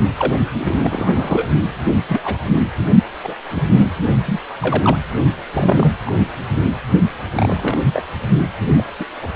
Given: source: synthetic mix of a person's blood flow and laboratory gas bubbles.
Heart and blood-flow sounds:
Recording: Doppler ultrasound of blood flow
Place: precordium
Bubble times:
0.18-0.33 s: bubbles
0.55-1.46 s: bubbles
2.08-2.21 s: bubbles
2.23-2.38 s: bubbles
2.52-2.62 s: bubbles
3.23-3.34 s: bubbles
3.50-3.91 s: bubbles
4.25-4.39 s: bubbles
4.61-4.97 s: bubbles
5.53-5.93 s: bubbles
6.05-6.11 s: bubbles
6.19-6.27 s: bubbles
7.33-7.81 s: bubbles
7.93-8.02 s: bubbles
8.77-8.84 s: bubbles
8.99-9.04 s: bubbles
9.22-9.28 s: bubbles
From the record:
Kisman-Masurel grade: 242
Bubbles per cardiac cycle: several, 3 to 8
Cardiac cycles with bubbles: 100%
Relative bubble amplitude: moderate (0.250 to 0.450)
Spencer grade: 3 (all of the cardiac periods contain showers or single bubble signals, but not dominating or overriding the cardiac motion signals)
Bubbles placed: only in the low amplitude regions of the cardiac cycle

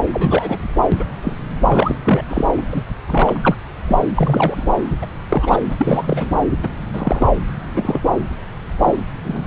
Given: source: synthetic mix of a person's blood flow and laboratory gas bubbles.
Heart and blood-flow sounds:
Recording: Doppler ultrasound of blood flow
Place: subclavian vein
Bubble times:
0.13-0.58 s: bubbles
0.76-0.82 s: bubbles
0.92-1.04 s: bubbles
1.23-1.36 s: bubbles
1.67-1.97 s: bubbles
2.04-2.23 s: bubbles
2.28-2.44 s: bubbles
2.56-2.83 s: bubbles
3.07-3.39 s: bubbles
3.43-3.55 s: bubbles
3.88-3.96 s: bubbles
4.16-4.77 s: bubbles
5.01-5.06 s: bubbles
5.29-5.58 s: bubbles
5.69-6.30 s: bubbles
6.62-6.68 s: bubbles
6.93-7.26 s: bubbles
7.74-8.00 s: bubbles
8.80-8.96 s: bubbles
9.23-9.45 s: bubbles
From the record:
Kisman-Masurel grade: 242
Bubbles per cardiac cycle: several, 3 to 8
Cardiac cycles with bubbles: 100%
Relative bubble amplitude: moderate (0.250 to 0.450)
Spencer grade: 3 (all of the cardiac periods contain showers or single bubble signals, but not dominating or overriding the cardiac motion signals)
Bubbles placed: anywhere in the cardiac cycle

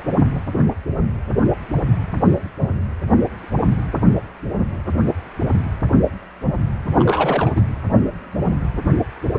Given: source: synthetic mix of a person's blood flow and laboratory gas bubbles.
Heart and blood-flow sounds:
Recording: Doppler ultrasound of blood flow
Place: precordium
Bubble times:
6.95-7.51 s: bubbles
7.55-7.62 s: bubbles
From the record:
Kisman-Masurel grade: 222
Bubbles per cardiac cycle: several, 3 to 8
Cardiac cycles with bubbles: 10 to 50%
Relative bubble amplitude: moderate (0.250 to 0.450)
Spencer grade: 2 (many but less than half of the cardiac periods contain bubble signals, singularly or in groups)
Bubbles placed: anywhere in the cardiac cycle

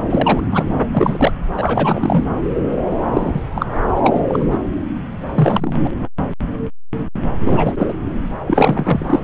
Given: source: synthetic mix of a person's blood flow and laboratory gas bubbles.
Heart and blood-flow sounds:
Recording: Doppler ultrasound of blood flow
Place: subclavian vein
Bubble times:
0.10-0.41 s: bubbles
0.52-0.64 s: bubbles
0.91-1.32 s: bubbles
1.57-2.24 s: bubbles
3.13-3.42 s: bubbles
3.55-3.66 s: bubbles
3.87-4.22 s: bubbles
4.28-4.47 s: bubbles
4.50-4.58 s: bubbles
5.33-5.91 s: bubbles
7.38-7.74 s: bubbles
7.78-7.93 s: bubbles
8.47-9.20 s: bubbles
From the record:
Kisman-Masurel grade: 233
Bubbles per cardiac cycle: several, 3 to 8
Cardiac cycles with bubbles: 50 to 99%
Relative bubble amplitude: loud (0.450 to 0.775)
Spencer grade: 3 (all of the cardiac periods contain showers or single bubble signals, but not dominating or overriding the cardiac motion signals)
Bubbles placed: anywhere in the cardiac cycle

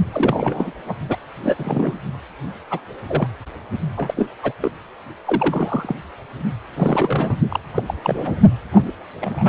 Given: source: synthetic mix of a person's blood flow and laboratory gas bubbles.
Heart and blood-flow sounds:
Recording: Doppler ultrasound of blood flow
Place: precordium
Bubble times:
0.12-0.71 s: bubbles
0.85-0.94 s: bubbles
1.09-1.18 s: bubbles
1.43-1.55 s: bubbles
1.58-1.98 s: bubbles
2.71-2.79 s: bubbles
3.08-3.28 s: bubbles
3.96-4.14 s: bubbles
4.17-4.28 s: bubbles
4.43-4.53 s: bubbles
4.60-4.72 s: bubbles
5.25-5.96 s: bubbles
6.76-7.38 s: bubbles
7.49-7.60 s: bubbles
7.74-7.83 s: bubbles
7.86-7.94 s: bubbles
8.04-8.39 s: bubbles
8.72-8.91 s: bubbles
9.21-9.49 s: bubbles
From the record:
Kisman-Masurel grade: 242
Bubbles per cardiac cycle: several, 3 to 8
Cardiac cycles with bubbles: 100%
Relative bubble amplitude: moderate (0.250 to 0.450)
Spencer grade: 3 (all of the cardiac periods contain showers or single bubble signals, but not dominating or overriding the cardiac motion signals)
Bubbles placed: only in the low amplitude regions of the cardiac cycle

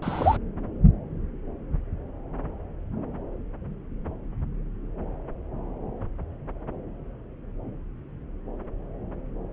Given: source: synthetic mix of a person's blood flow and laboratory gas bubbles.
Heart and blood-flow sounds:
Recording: Doppler ultrasound of blood flow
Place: subclavian vein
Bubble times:
0.02-0.37 s: bubbles
From the record:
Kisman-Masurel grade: 112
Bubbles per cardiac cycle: 1 to 2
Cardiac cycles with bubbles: 1 to 10%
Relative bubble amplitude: moderate (0.250 to 0.450)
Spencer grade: 1 (occasional bubble signal discernible with the cardiac motion signal, with majority of cardiac periods free of bubbles)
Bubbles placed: anywhere in the cardiac cycle

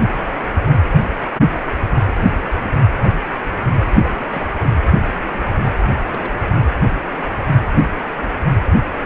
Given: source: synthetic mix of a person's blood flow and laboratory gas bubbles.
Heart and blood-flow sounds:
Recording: Doppler ultrasound of blood flow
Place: precordium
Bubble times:
3.91-4.26 s: bubbles
4.31-4.43 s: bubbles
6.06-6.33 s: bubbles
From the record:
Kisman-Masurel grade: 221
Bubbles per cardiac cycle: several, 3 to 8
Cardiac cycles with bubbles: 10 to 50%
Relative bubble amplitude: barely perceptible (0.100 to 0.250)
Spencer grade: 2 (many but less than half of the cardiac periods contain bubble signals, singularly or in groups)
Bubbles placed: anywhere in the cardiac cycle

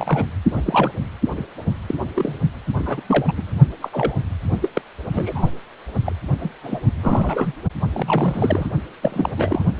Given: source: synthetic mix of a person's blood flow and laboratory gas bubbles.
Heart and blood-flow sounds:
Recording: Doppler ultrasound of blood flow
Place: precordium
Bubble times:
0.00-0.26 s: bubbles
0.55-0.61 s: bubbles
0.66-0.92 s: bubbles
1.35-1.45 s: bubbles
1.88-1.95 s: bubbles
2.15-2.39 s: bubbles
2.79-3.03 s: bubbles
3.08-3.55 s: bubbles
3.82-3.90 s: bubbles
3.93-4.15 s: bubbles
4.62-4.69 s: bubbles
4.74-4.82 s: bubbles
5.12-5.50 s: bubbles
6.06-6.12 s: bubbles
6.41-6.50 s: bubbles
6.63-6.79 s: bubbles
7.03-7.53 s: bubbles
7.92-8.67 s: bubbles
9.02-9.35 s: bubbles
9.37-9.63 s: bubbles
9.77-9.80 s: bubbles
From the record:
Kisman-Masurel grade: 242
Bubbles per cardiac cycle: several, 3 to 8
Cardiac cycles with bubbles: 100%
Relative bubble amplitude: moderate (0.250 to 0.450)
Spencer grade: 3 (all of the cardiac periods contain showers or single bubble signals, but not dominating or overriding the cardiac motion signals)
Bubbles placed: only in the low amplitude regions of the cardiac cycle

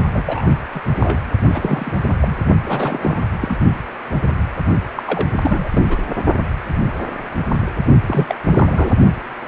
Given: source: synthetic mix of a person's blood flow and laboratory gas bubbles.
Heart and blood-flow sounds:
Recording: Doppler ultrasound of blood flow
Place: precordium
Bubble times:
0.11-0.22 s: bubbles
0.25-0.57 s: bubbles
0.74-0.81 s: bubbles
0.84-1.20 s: bubbles
1.44-2.01 s: bubbles
2.06-2.16 s: bubbles
2.22-2.36 s: bubbles
2.65-3.21 s: bubbles
3.41-3.58 s: bubbles
4.96-5.03 s: bubbles
5.07-5.26 s: bubbles
5.42-5.69 s: bubbles
5.71-5.97 s: bubbles
8.07-8.35 s: bubbles
8.46-8.95 s: bubbles
From the record:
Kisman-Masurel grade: 332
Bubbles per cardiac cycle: rolling drumbeat, 9 or more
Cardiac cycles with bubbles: 50 to 99%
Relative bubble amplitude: moderate (0.250 to 0.450)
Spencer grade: 3 (all of the cardiac periods contain showers or single bubble signals, but not dominating or overriding the cardiac motion signals)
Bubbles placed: only in the low amplitude regions of the cardiac cycle

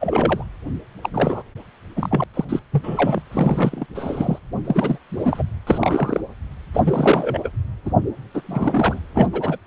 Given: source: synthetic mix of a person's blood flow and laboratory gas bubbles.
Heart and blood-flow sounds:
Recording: Doppler ultrasound of blood flow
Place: precordium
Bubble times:
0.00-0.44 s: bubbles
1.03-1.09 s: bubbles
1.14-1.43 s: bubbles
1.96-2.24 s: bubbles
2.33-2.45 s: bubbles
2.48-2.60 s: bubbles
2.72-3.22 s: bubbles
3.31-3.86 s: bubbles
3.94-4.38 s: bubbles
4.64-4.98 s: bubbles
5.10-5.42 s: bubbles
5.67-6.21 s: bubbles
6.73-6.80 s: bubbles
6.83-7.48 s: bubbles
7.85-7.91 s: bubbles
8.34-9.00 s: bubbles
9.14-9.28 s: bubbles
9.32-9.57 s: bubbles
From the record:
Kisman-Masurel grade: 342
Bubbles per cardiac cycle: rolling drumbeat, 9 or more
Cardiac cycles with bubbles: 100%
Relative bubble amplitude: moderate (0.250 to 0.450)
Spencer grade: 3 (all of the cardiac periods contain showers or single bubble signals, but not dominating or overriding the cardiac motion signals)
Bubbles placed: anywhere in the cardiac cycle

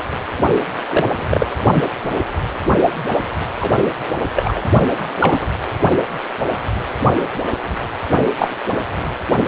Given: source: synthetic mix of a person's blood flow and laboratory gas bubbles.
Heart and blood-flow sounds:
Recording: Doppler ultrasound of blood flow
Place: precordium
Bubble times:
0.89-1.48 s: bubbles
1.75-1.83 s: bubbles
2.11-2.19 s: bubbles
3.61-3.72 s: bubbles
4.36-4.61 s: bubbles
5.20-5.49 s: bubbles
8.39-8.49 s: bubbles
From the record:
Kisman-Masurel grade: 123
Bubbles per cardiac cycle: 1 to 2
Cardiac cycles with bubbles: 10 to 50%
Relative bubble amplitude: loud (0.450 to 0.775)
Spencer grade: 2 (many but less than half of the cardiac periods contain bubble signals, singularly or in groups)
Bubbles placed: only in the low amplitude regions of the cardiac cycle

